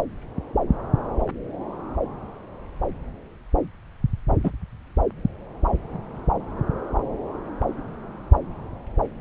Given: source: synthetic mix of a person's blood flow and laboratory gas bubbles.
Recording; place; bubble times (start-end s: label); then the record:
Doppler ultrasound of blood flow; subclavian vein
4.44-4.51 s: bubbles
From the record:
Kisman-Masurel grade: 113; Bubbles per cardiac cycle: 1 to 2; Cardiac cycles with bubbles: 1 to 10%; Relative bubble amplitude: loud (0.450 to 0.775); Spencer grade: 1 (occasional bubble signal discernible with the cardiac motion signal, with majority of cardiac periods free of bubbles); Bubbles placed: anywhere in the cardiac cycle